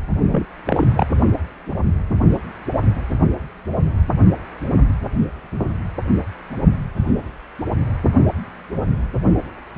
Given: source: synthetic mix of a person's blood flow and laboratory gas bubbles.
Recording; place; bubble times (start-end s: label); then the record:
Doppler ultrasound of blood flow; precordium
0.32-0.46 s: bubbles
0.66-1.07 s: bubbles
From the record:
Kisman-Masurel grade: 212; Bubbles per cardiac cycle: several, 3 to 8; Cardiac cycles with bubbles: 1 to 10%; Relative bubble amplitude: moderate (0.250 to 0.450); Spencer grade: 1 (occasional bubble signal discernible with the cardiac motion signal, with majority of cardiac periods free of bubbles); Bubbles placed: only in the low amplitude regions of the cardiac cycle